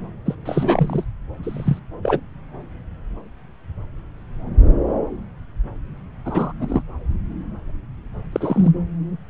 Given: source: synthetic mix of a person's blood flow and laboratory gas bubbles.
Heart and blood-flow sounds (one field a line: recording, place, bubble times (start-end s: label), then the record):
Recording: Doppler ultrasound of blood flow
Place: subclavian vein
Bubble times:
0.25-0.35 s: bubbles
0.46-1.04 s: bubbles
1.43-1.79 s: bubbles
2.02-2.20 s: bubbles
6.25-6.52 s: bubbles
6.59-6.82 s: bubbles
8.32-8.71 s: bubbles
From the record:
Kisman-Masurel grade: 222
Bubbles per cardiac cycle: several, 3 to 8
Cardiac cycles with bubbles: 10 to 50%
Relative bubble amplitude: moderate (0.250 to 0.450)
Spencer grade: 2 (many but less than half of the cardiac periods contain bubble signals, singularly or in groups)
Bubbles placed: anywhere in the cardiac cycle